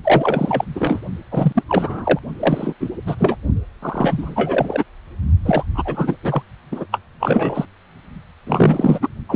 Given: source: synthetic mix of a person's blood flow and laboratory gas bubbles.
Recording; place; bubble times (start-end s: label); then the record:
Doppler ultrasound of blood flow; precordium
0.04-0.65 s: bubbles
0.75-1.01 s: bubbles
1.31-1.63 s: bubbles
1.67-2.19 s: bubbles
2.39-2.74 s: bubbles
2.80-2.89 s: bubbles
3.07-3.16 s: bubbles
3.18-3.36 s: bubbles
3.82-4.83 s: bubbles
5.45-5.63 s: bubbles
5.74-6.17 s: bubbles
6.22-6.42 s: bubbles
6.71-6.85 s: bubbles
6.91-6.99 s: bubbles
7.19-7.66 s: bubbles
8.46-9.09 s: bubbles
9.29-9.36 s: bubbles
From the record:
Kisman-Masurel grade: 343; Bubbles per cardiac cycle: rolling drumbeat, 9 or more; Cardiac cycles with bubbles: 100%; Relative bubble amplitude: loud (0.450 to 0.775); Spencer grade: 3 (all of the cardiac periods contain showers or single bubble signals, but not dominating or overriding the cardiac motion signals); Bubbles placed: only in the low amplitude regions of the cardiac cycle